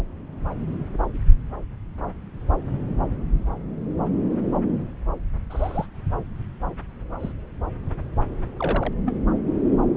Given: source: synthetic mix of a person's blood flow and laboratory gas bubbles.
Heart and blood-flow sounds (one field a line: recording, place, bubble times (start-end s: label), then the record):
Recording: Doppler ultrasound of blood flow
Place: subclavian vein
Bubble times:
5.50-5.87 s: bubbles
7.18-7.33 s: bubbles
8.57-8.93 s: bubbles
9.05-9.14 s: bubbles
From the record:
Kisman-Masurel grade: 121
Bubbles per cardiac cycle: 1 to 2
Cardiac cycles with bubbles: 10 to 50%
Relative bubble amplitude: barely perceptible (0.100 to 0.250)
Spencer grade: 2 (many but less than half of the cardiac periods contain bubble signals, singularly or in groups)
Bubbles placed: anywhere in the cardiac cycle